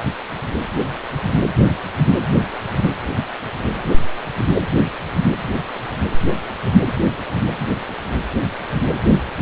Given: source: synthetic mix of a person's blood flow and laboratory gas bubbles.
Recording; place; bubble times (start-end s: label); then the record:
Doppler ultrasound of blood flow; precordium
2.77-2.89 s: bubbles
From the record:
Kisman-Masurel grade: 112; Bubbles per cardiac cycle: 1 to 2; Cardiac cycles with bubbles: 1 to 10%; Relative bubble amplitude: moderate (0.250 to 0.450); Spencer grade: 1 (occasional bubble signal discernible with the cardiac motion signal, with majority of cardiac periods free of bubbles); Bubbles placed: anywhere in the cardiac cycle